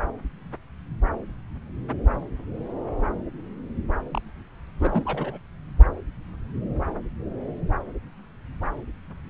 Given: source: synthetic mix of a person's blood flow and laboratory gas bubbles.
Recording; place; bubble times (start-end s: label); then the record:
Doppler ultrasound of blood flow; subclavian vein
4.10-4.18 s: bubbles
4.79-5.38 s: bubbles
From the record:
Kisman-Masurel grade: 211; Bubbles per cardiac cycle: several, 3 to 8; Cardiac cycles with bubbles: 1 to 10%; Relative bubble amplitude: barely perceptible (0.100 to 0.250); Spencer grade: 1 (occasional bubble signal discernible with the cardiac motion signal, with majority of cardiac periods free of bubbles); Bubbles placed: anywhere in the cardiac cycle